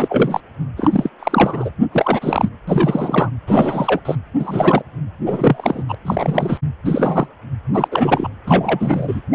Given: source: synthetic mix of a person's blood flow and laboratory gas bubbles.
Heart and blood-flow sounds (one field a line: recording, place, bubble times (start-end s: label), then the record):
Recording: Doppler ultrasound of blood flow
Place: precordium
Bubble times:
0.00-0.41 s: bubbles
0.76-1.09 s: bubbles
1.19-1.71 s: bubbles
1.92-2.50 s: bubbles
2.67-3.30 s: bubbles
3.46-4.01 s: bubbles
4.05-4.15 s: bubbles
4.38-4.82 s: bubbles
5.25-5.84 s: bubbles
5.88-5.95 s: bubbles
6.05-6.57 s: bubbles
6.85-7.27 s: bubbles
7.74-7.88 s: bubbles
7.92-8.29 s: bubbles
8.45-9.21 s: bubbles
9.32-9.35 s: bubbles
From the record:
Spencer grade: 3 (all of the cardiac periods contain showers or single bubble signals, but not dominating or overriding the cardiac motion signals)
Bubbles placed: anywhere in the cardiac cycle